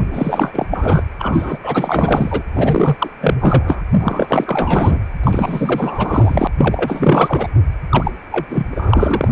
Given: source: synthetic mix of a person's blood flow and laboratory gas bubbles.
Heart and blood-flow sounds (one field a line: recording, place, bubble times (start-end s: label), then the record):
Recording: Doppler ultrasound of blood flow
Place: precordium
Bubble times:
0.00-0.07 s: bubbles
0.11-0.67 s: bubbles
0.70-1.03 s: bubbles
1.19-1.58 s: bubbles
1.62-2.43 s: bubbles
2.52-3.10 s: bubbles
3.21-3.82 s: bubbles
4.00-4.99 s: bubbles
5.23-6.47 s: bubbles
6.58-7.50 s: bubbles
7.89-8.12 s: bubbles
8.31-8.46 s: bubbles
8.49-8.67 s: bubbles
8.71-9.29 s: bubbles
From the record:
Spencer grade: 4 (maximum detectable bubble signal sounding continuously throughout systole and diastole of every cardiac period, and overriding the amplitude of the normal cardiac signals)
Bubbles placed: anywhere in the cardiac cycle